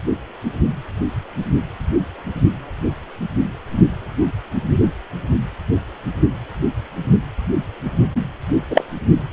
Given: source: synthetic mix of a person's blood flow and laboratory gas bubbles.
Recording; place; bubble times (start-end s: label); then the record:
Doppler ultrasound of blood flow; precordium
8.70-8.84 s: bubbles
From the record:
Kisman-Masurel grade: 123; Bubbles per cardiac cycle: 1 to 2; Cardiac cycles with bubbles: 10 to 50%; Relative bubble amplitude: loud (0.450 to 0.775); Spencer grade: 2 (many but less than half of the cardiac periods contain bubble signals, singularly or in groups); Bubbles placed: anywhere in the cardiac cycle